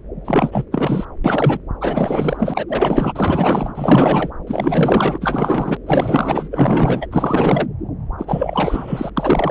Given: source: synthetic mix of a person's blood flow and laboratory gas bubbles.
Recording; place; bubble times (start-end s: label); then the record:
Doppler ultrasound of blood flow; subclavian vein
0.24-0.64 s: bubbles
0.71-1.05 s: bubbles
1.24-1.58 s: bubbles
1.80-2.65 s: bubbles
2.68-4.30 s: bubbles
4.46-5.18 s: bubbles
5.21-5.77 s: bubbles
5.86-7.07 s: bubbles
7.11-7.67 s: bubbles
8.18-9.11 s: bubbles
9.17-9.51 s: bubbles
From the record:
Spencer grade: 4 (maximum detectable bubble signal sounding continuously throughout systole and diastole of every cardiac period, and overriding the amplitude of the normal cardiac signals); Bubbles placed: anywhere in the cardiac cycle